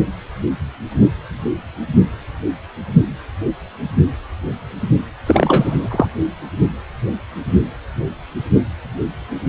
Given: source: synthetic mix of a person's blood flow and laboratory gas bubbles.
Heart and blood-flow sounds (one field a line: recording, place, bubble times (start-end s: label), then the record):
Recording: Doppler ultrasound of blood flow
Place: precordium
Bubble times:
5.26-6.06 s: bubbles
From the record:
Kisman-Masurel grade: 213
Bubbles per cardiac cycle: several, 3 to 8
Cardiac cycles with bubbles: 1 to 10%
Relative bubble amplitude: loud (0.450 to 0.775)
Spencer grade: 1 (occasional bubble signal discernible with the cardiac motion signal, with majority of cardiac periods free of bubbles)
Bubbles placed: only in the low amplitude regions of the cardiac cycle